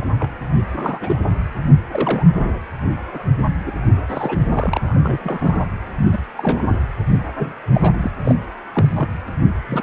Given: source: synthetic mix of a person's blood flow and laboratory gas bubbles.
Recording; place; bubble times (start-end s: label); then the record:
Doppler ultrasound of blood flow; precordium
0.00-0.04 s: bubbles
0.20-0.30 s: bubbles
0.73-1.16 s: bubbles
1.92-2.60 s: bubbles
3.12-3.19 s: bubbles
3.66-3.73 s: bubbles
4.08-4.38 s: bubbles
4.52-4.96 s: bubbles
5.04-5.65 s: bubbles
6.12-6.19 s: bubbles
6.38-6.62 s: bubbles
6.64-6.79 s: bubbles
7.08-7.18 s: bubbles
7.37-7.52 s: bubbles
7.74-7.93 s: bubbles
8.01-8.12 s: bubbles
8.25-8.35 s: bubbles
8.73-9.09 s: bubbles
9.67-9.83 s: bubbles
From the record:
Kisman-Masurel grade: 242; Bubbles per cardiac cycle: several, 3 to 8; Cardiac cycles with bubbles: 100%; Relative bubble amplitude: moderate (0.250 to 0.450); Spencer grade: 3 (all of the cardiac periods contain showers or single bubble signals, but not dominating or overriding the cardiac motion signals); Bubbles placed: anywhere in the cardiac cycle